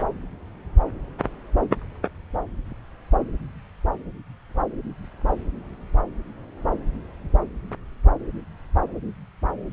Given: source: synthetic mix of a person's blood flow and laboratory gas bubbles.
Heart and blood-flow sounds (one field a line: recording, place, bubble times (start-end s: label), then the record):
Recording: Doppler ultrasound of blood flow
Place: subclavian vein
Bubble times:
no bubbles
From the record:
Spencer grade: 0 (complete lack of bubble signals)